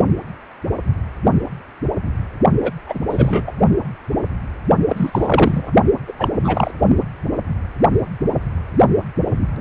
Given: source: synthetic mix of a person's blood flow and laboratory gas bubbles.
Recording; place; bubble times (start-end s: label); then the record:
Doppler ultrasound of blood flow; precordium
2.62-2.72 s: bubbles
2.86-2.99 s: bubbles
3.10-3.52 s: bubbles
4.89-5.71 s: bubbles
6.08-6.12 s: bubbles
6.19-6.31 s: bubbles
6.44-6.71 s: bubbles
From the record:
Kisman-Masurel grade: 223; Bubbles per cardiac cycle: several, 3 to 8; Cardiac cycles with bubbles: 10 to 50%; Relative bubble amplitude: loud (0.450 to 0.775); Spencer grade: 2 (many but less than half of the cardiac periods contain bubble signals, singularly or in groups); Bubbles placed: only in the low amplitude regions of the cardiac cycle